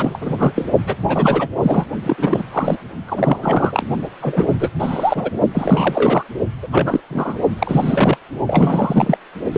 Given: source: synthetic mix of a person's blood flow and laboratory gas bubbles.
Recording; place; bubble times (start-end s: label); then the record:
Doppler ultrasound of blood flow; precordium
0.00-0.18 s: bubbles
0.21-0.52 s: bubbles
0.55-0.66 s: bubbles
0.86-0.96 s: bubbles
1.07-1.48 s: bubbles
1.62-1.84 s: bubbles
2.04-2.43 s: bubbles
2.51-2.77 s: bubbles
3.07-3.86 s: bubbles
4.21-4.51 s: bubbles
4.59-4.69 s: bubbles
4.79-5.31 s: bubbles
5.54-6.23 s: bubbles
6.62-6.68 s: bubbles
6.72-7.00 s: bubbles
7.10-7.39 s: bubbles
7.59-8.18 s: bubbles
8.47-9.18 s: bubbles
9.53-9.58 s: bubbles
From the record:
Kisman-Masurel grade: 343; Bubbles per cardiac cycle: rolling drumbeat, 9 or more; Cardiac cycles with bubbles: 100%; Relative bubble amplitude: loud (0.450 to 0.775); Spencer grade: 3 (all of the cardiac periods contain showers or single bubble signals, but not dominating or overriding the cardiac motion signals); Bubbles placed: only in the low amplitude regions of the cardiac cycle